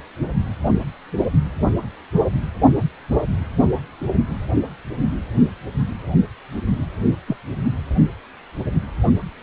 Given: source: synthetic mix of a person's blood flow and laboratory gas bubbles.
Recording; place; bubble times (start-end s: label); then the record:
Doppler ultrasound of blood flow; precordium
7.27-7.37 s: bubbles
From the record:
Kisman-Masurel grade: 112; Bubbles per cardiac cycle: 1 to 2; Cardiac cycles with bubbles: 1 to 10%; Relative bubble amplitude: moderate (0.250 to 0.450); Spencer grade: 1 (occasional bubble signal discernible with the cardiac motion signal, with majority of cardiac periods free of bubbles); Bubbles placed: anywhere in the cardiac cycle